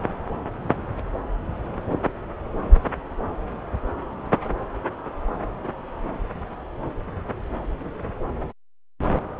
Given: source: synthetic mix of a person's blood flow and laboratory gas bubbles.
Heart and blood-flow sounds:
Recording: Doppler ultrasound of blood flow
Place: subclavian vein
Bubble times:
no bubbles
From the record:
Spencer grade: 0 (complete lack of bubble signals)

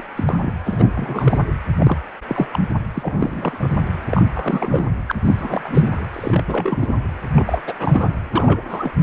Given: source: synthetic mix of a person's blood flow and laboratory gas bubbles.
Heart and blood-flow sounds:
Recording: Doppler ultrasound of blood flow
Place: precordium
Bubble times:
0.00-0.04 s: bubbles
0.15-0.51 s: bubbles
0.65-0.93 s: bubbles
0.95-1.41 s: bubbles
1.79-1.98 s: bubbles
2.29-2.47 s: bubbles
2.52-2.59 s: bubbles
2.94-3.78 s: bubbles
4.09-4.22 s: bubbles
4.34-4.85 s: bubbles
5.07-5.11 s: bubbles
5.25-6.05 s: bubbles
6.12-6.93 s: bubbles
7.32-7.61 s: bubbles
7.67-8.10 s: bubbles
8.33-8.63 s: bubbles
8.69-8.91 s: bubbles
From the record:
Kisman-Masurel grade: 342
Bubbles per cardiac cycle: rolling drumbeat, 9 or more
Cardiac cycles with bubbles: 100%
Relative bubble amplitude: moderate (0.250 to 0.450)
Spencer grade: 3 (all of the cardiac periods contain showers or single bubble signals, but not dominating or overriding the cardiac motion signals)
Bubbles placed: anywhere in the cardiac cycle

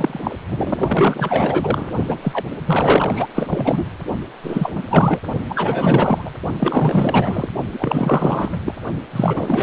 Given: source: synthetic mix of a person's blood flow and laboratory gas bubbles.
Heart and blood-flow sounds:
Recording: Doppler ultrasound of blood flow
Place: precordium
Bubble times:
0.00-0.19 s: bubbles
0.24-0.39 s: bubbles
0.50-1.91 s: bubbles
2.07-2.19 s: bubbles
2.21-2.45 s: bubbles
2.66-3.27 s: bubbles
3.34-3.85 s: bubbles
4.42-4.83 s: bubbles
4.90-5.19 s: bubbles
5.49-6.31 s: bubbles
6.57-7.49 s: bubbles
7.73-8.60 s: bubbles
8.65-8.75 s: bubbles
9.12-9.63 s: bubbles
From the record:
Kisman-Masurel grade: 444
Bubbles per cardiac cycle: continuous sound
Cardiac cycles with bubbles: 100%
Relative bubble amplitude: maximal (0.775 to 0.999)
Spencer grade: 4 (maximum detectable bubble signal sounding continuously throughout systole and diastole of every cardiac period, and overriding the amplitude of the normal cardiac signals)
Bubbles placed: only in the low amplitude regions of the cardiac cycle

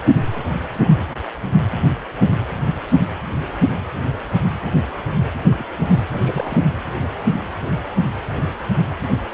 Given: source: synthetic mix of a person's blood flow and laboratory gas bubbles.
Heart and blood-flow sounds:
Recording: Doppler ultrasound of blood flow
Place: precordium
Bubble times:
5.47-5.64 s: bubbles
5.78-5.88 s: bubbles
6.08-6.62 s: bubbles
From the record:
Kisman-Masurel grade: 111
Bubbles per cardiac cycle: 1 to 2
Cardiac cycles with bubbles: 1 to 10%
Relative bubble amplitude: barely perceptible (0.100 to 0.250)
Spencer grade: 1 (occasional bubble signal discernible with the cardiac motion signal, with majority of cardiac periods free of bubbles)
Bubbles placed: anywhere in the cardiac cycle

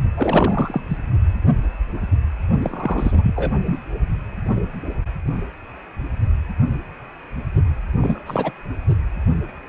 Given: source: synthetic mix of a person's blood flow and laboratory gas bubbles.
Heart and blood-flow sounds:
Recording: Doppler ultrasound of blood flow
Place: precordium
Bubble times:
0.16-0.81 s: bubbles
0.88-0.98 s: bubbles
2.62-3.54 s: bubbles
3.65-3.79 s: bubbles
8.01-8.22 s: bubbles
8.26-8.52 s: bubbles
From the record:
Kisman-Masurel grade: 223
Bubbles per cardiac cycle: several, 3 to 8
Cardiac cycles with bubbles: 10 to 50%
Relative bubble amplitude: loud (0.450 to 0.775)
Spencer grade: 2 (many but less than half of the cardiac periods contain bubble signals, singularly or in groups)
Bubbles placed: only in the low amplitude regions of the cardiac cycle

